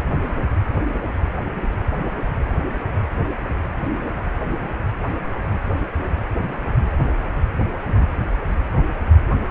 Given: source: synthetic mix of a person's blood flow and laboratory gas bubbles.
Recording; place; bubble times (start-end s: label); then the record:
Doppler ultrasound of blood flow; precordium
7.83-8.06 s: bubbles
From the record:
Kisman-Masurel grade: 111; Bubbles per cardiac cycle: 1 to 2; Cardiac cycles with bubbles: 1 to 10%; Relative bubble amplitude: barely perceptible (0.100 to 0.250); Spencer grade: 1 (occasional bubble signal discernible with the cardiac motion signal, with majority of cardiac periods free of bubbles); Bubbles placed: anywhere in the cardiac cycle